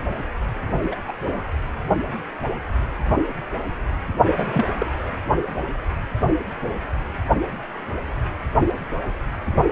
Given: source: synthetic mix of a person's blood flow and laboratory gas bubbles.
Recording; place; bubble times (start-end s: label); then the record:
Doppler ultrasound of blood flow; precordium
0.82-0.95 s: bubbles
1.08-1.12 s: bubbles
1.22-1.43 s: bubbles
4.25-4.65 s: bubbles
4.78-4.86 s: bubbles
From the record:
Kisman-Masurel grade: 222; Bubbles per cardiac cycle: several, 3 to 8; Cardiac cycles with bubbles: 10 to 50%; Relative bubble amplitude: moderate (0.250 to 0.450); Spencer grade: 2 (many but less than half of the cardiac periods contain bubble signals, singularly or in groups); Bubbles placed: anywhere in the cardiac cycle